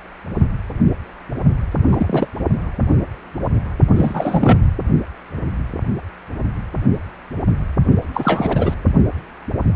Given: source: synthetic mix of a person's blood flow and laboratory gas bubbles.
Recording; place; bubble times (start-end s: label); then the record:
Doppler ultrasound of blood flow; precordium
1.91-2.28 s: bubbles
3.95-4.58 s: bubbles
8.13-8.74 s: bubbles
From the record:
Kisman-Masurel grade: 223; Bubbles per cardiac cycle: several, 3 to 8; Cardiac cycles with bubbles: 10 to 50%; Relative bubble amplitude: loud (0.450 to 0.775); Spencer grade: 2 (many but less than half of the cardiac periods contain bubble signals, singularly or in groups); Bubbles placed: only in the low amplitude regions of the cardiac cycle